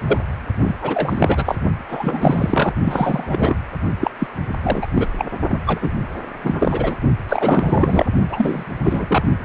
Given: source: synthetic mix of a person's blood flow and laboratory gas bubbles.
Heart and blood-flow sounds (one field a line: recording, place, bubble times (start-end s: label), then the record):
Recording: Doppler ultrasound of blood flow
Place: precordium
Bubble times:
0.06-0.18 s: bubbles
0.59-0.75 s: bubbles
0.81-1.56 s: bubbles
1.89-2.73 s: bubbles
2.83-3.56 s: bubbles
4.00-4.11 s: bubbles
4.19-4.27 s: bubbles
4.63-4.88 s: bubbles
4.94-5.07 s: bubbles
5.17-5.25 s: bubbles
5.48-5.58 s: bubbles
5.66-5.90 s: bubbles
6.43-6.96 s: bubbles
7.28-8.05 s: bubbles
8.30-8.64 s: bubbles
8.85-9.24 s: bubbles
From the record:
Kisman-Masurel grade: 343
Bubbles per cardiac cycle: rolling drumbeat, 9 or more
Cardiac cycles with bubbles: 100%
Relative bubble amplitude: loud (0.450 to 0.775)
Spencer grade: 3 (all of the cardiac periods contain showers or single bubble signals, but not dominating or overriding the cardiac motion signals)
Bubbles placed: only in the low amplitude regions of the cardiac cycle